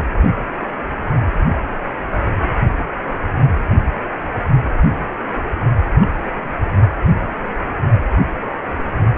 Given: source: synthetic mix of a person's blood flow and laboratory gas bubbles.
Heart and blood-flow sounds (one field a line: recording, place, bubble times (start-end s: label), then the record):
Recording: Doppler ultrasound of blood flow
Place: precordium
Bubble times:
6.01-6.20 s: bubbles
From the record:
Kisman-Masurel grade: 121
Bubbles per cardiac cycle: 1 to 2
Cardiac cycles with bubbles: 10 to 50%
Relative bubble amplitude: barely perceptible (0.100 to 0.250)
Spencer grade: 2 (many but less than half of the cardiac periods contain bubble signals, singularly or in groups)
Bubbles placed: only in the low amplitude regions of the cardiac cycle